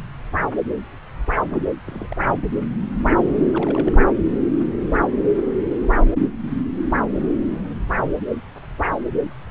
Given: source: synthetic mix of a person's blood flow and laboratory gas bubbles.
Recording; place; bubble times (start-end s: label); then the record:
Doppler ultrasound of blood flow; subclavian vein
1.50-1.70 s: bubbles
1.85-2.08 s: bubbles
2.10-2.14 s: bubbles
3.52-3.98 s: bubbles
From the record:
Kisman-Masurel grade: 221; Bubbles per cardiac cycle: several, 3 to 8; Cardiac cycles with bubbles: 10 to 50%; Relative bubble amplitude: barely perceptible (0.100 to 0.250); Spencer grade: 2 (many but less than half of the cardiac periods contain bubble signals, singularly or in groups); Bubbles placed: anywhere in the cardiac cycle